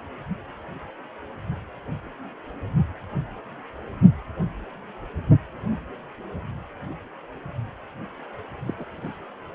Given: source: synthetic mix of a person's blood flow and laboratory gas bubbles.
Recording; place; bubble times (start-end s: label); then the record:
Doppler ultrasound of blood flow; precordium
8.66-8.74 s: bubbles
8.78-8.85 s: bubbles
8.90-9.19 s: bubbles
From the record:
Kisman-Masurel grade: 221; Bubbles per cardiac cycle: several, 3 to 8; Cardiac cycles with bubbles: 10 to 50%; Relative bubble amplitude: barely perceptible (0.100 to 0.250); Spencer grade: 2 (many but less than half of the cardiac periods contain bubble signals, singularly or in groups); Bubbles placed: anywhere in the cardiac cycle